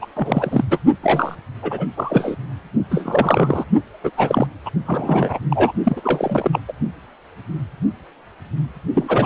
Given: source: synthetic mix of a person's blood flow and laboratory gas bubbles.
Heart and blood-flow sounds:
Doppler ultrasound of blood flow; precordium
0.01-0.05 s: bubbles
0.15-0.65 s: bubbles
0.70-0.78 s: bubbles
1.02-1.35 s: bubbles
1.62-1.86 s: bubbles
1.96-2.36 s: bubbles
2.91-3.64 s: bubbles
4.04-4.11 s: bubbles
4.17-4.46 s: bubbles
4.65-4.70 s: bubbles
4.86-5.39 s: bubbles
5.50-5.72 s: bubbles
5.83-6.61 s: bubbles
6.68-6.72 s: bubbles
8.94-9.26 s: bubbles
From the record:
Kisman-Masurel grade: 333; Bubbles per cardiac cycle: rolling drumbeat, 9 or more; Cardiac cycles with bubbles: 50 to 99%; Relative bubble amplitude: loud (0.450 to 0.775); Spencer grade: 3 (all of the cardiac periods contain showers or single bubble signals, but not dominating or overriding the cardiac motion signals); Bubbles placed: only in the low amplitude regions of the cardiac cycle

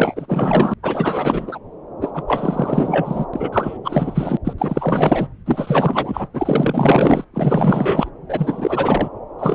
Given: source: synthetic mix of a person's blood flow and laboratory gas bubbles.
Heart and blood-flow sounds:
Doppler ultrasound of blood flow; subclavian vein
0.00-0.74 s: bubbles
0.82-1.58 s: bubbles
2.00-2.11 s: bubbles
2.14-2.24 s: bubbles
2.27-3.25 s: bubbles
3.33-3.50 s: bubbles
3.52-3.79 s: bubbles
3.84-4.37 s: bubbles
4.44-4.53 s: bubbles
4.58-5.28 s: bubbles
5.46-6.28 s: bubbles
6.33-7.25 s: bubbles
7.33-8.10 s: bubbles
8.29-9.09 s: bubbles
9.39-9.54 s: bubbles
From the record:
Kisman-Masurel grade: 444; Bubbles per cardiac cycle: continuous sound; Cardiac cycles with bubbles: 100%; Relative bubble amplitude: maximal (0.775 to 0.999); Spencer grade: 4 (maximum detectable bubble signal sounding continuously throughout systole and diastole of every cardiac period, and overriding the amplitude of the normal cardiac signals); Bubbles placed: anywhere in the cardiac cycle

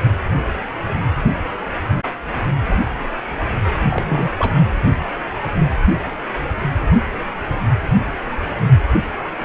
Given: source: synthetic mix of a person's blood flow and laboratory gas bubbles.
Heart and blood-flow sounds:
Doppler ultrasound of blood flow; precordium
3.90-4.29 s: bubbles
4.38-4.54 s: bubbles
From the record:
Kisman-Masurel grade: 112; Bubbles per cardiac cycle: 1 to 2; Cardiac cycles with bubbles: 1 to 10%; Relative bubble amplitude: moderate (0.250 to 0.450); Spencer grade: 1 (occasional bubble signal discernible with the cardiac motion signal, with majority of cardiac periods free of bubbles); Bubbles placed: anywhere in the cardiac cycle

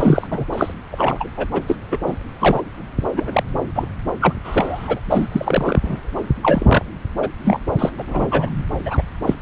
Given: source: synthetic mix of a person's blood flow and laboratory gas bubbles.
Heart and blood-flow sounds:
Doppler ultrasound of blood flow; subclavian vein
0.00-0.27 s: bubbles
0.30-0.45 s: bubbles
0.52-0.73 s: bubbles
0.91-1.28 s: bubbles
1.36-1.46 s: bubbles
1.52-1.61 s: bubbles
1.68-1.77 s: bubbles
1.91-1.98 s: bubbles
2.06-2.15 s: bubbles
2.40-2.61 s: bubbles
3.16-3.43 s: bubbles
3.75-3.88 s: bubbles
4.21-4.34 s: bubbles
4.44-5.00 s: bubbles
5.07-5.81 s: bubbles
5.84-6.00 s: bubbles
6.42-6.83 s: bubbles
7.22-7.28 s: bubbles
7.44-7.60 s: bubbles
7.78-7.91 s: bubbles
7.98-8.04 s: bubbles
8.07-8.27 s: bubbles
8.31-8.49 s: bubbles
8.86-9.02 s: bubbles
9.26-9.34 s: bubbles
From the record:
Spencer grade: 3 (all of the cardiac periods contain showers or single bubble signals, but not dominating or overriding the cardiac motion signals); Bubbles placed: anywhere in the cardiac cycle

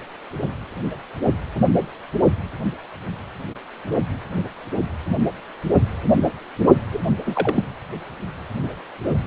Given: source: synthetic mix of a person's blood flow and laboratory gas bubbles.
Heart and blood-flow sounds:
Doppler ultrasound of blood flow; precordium
6.92-6.99 s: bubbles
7.25-7.63 s: bubbles
From the record:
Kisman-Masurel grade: 212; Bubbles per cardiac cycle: several, 3 to 8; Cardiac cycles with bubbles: 1 to 10%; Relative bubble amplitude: moderate (0.250 to 0.450); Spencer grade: 1 (occasional bubble signal discernible with the cardiac motion signal, with majority of cardiac periods free of bubbles); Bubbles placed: only in the low amplitude regions of the cardiac cycle

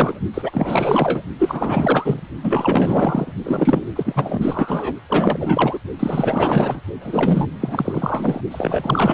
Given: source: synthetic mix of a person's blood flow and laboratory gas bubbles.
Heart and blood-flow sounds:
Doppler ultrasound of blood flow; precordium
0.00-0.20 s: bubbles
0.34-1.22 s: bubbles
1.38-2.21 s: bubbles
2.43-3.33 s: bubbles
3.43-3.85 s: bubbles
3.96-4.96 s: bubbles
5.08-5.79 s: bubbles
5.99-6.81 s: bubbles
7.00-7.46 s: bubbles
7.53-8.41 s: bubbles
8.50-9.13 s: bubbles
From the record:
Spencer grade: 4 (maximum detectable bubble signal sounding continuously throughout systole and diastole of every cardiac period, and overriding the amplitude of the normal cardiac signals); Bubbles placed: only in the low amplitude regions of the cardiac cycle

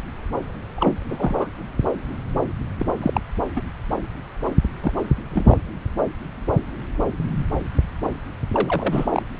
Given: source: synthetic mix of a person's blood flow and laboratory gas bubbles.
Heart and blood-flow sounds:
Doppler ultrasound of blood flow; subclavian vein
0.76-0.94 s: bubbles
1.06-1.47 s: bubbles
2.78-2.86 s: bubbles
2.97-3.21 s: bubbles
3.56-3.62 s: bubbles
4.83-4.93 s: bubbles
5.31-5.58 s: bubbles
8.54-9.22 s: bubbles
From the record:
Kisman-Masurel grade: 222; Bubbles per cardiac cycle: several, 3 to 8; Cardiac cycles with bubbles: 10 to 50%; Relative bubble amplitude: moderate (0.250 to 0.450); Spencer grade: 2 (many but less than half of the cardiac periods contain bubble signals, singularly or in groups); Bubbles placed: anywhere in the cardiac cycle

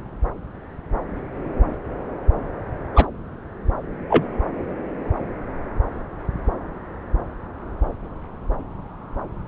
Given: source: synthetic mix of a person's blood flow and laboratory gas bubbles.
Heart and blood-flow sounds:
Doppler ultrasound of blood flow; subclavian vein
2.94-3.07 s: bubbles
4.09-4.25 s: bubbles
From the record:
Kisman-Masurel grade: 123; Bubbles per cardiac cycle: 1 to 2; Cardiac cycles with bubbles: 10 to 50%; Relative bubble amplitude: loud (0.450 to 0.775); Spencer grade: 2 (many but less than half of the cardiac periods contain bubble signals, singularly or in groups); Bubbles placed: anywhere in the cardiac cycle

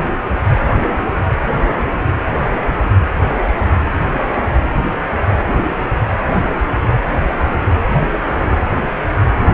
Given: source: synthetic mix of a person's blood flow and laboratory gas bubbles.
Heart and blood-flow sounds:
Doppler ultrasound of blood flow; precordium
no bubbles
From the record:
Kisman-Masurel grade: 000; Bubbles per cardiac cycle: 0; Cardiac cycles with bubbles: 0%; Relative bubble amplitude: no bubbles discernible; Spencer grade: 0 (complete lack of bubble signals)

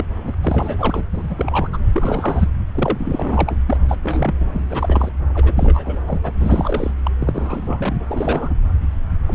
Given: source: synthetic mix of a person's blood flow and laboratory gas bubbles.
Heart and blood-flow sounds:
Doppler ultrasound of blood flow; subclavian vein
0.00-0.06 s: bubbles
0.25-0.34 s: bubbles
0.41-1.03 s: bubbles
1.12-1.35 s: bubbles
1.38-1.78 s: bubbles
1.94-2.48 s: bubbles
2.74-3.55 s: bubbles
3.66-3.77 s: bubbles
3.88-3.96 s: bubbles
4.03-4.35 s: bubbles
4.40-4.50 s: bubbles
4.53-4.62 s: bubbles
4.70-5.10 s: bubbles
5.34-5.98 s: bubbles
6.06-6.32 s: bubbles
6.39-6.91 s: bubbles
7.04-7.11 s: bubbles
7.19-7.96 s: bubbles
8.08-8.54 s: bubbles
9.28-9.35 s: bubbles
From the record:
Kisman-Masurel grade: 342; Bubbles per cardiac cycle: rolling drumbeat, 9 or more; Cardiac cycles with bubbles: 100%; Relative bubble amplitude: moderate (0.250 to 0.450); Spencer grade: 3 (all of the cardiac periods contain showers or single bubble signals, but not dominating or overriding the cardiac motion signals); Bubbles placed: anywhere in the cardiac cycle

